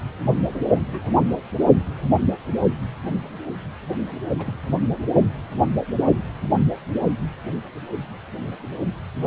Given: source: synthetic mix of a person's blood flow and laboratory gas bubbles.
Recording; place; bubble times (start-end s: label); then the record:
Doppler ultrasound of blood flow; precordium
0.86-1.24 s: bubbles
1.87-1.91 s: bubbles
4.38-4.53 s: bubbles
4.61-4.73 s: bubbles
From the record:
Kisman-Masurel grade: 221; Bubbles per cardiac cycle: several, 3 to 8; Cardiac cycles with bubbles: 10 to 50%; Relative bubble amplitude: barely perceptible (0.100 to 0.250); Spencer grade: 2 (many but less than half of the cardiac periods contain bubble signals, singularly or in groups); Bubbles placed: anywhere in the cardiac cycle